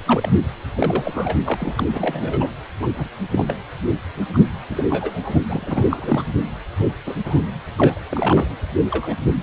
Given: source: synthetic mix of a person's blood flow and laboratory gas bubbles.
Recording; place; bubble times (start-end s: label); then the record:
Doppler ultrasound of blood flow; precordium
0.00-0.02 s: bubbles
0.06-0.39 s: bubbles
0.75-1.41 s: bubbles
1.45-1.57 s: bubbles
1.59-2.48 s: bubbles
2.80-2.87 s: bubbles
2.95-3.08 s: bubbles
3.31-3.44 s: bubbles
3.47-3.54 s: bubbles
4.33-4.39 s: bubbles
4.70-4.87 s: bubbles
4.90-5.20 s: bubbles
5.23-5.38 s: bubbles
5.48-6.34 s: bubbles
6.80-6.88 s: bubbles
7.06-7.15 s: bubbles
7.25-7.42 s: bubbles
7.77-8.01 s: bubbles
8.09-8.55 s: bubbles
8.90-9.17 s: bubbles
From the record:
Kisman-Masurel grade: 242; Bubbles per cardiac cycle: several, 3 to 8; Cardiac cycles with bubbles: 100%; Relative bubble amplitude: moderate (0.250 to 0.450); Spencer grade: 3 (all of the cardiac periods contain showers or single bubble signals, but not dominating or overriding the cardiac motion signals); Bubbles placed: anywhere in the cardiac cycle